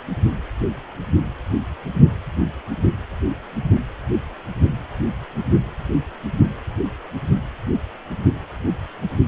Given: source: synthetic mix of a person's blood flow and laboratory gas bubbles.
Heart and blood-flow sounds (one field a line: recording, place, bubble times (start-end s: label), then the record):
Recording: Doppler ultrasound of blood flow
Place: precordium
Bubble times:
no bubbles
From the record:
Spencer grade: 0 (complete lack of bubble signals)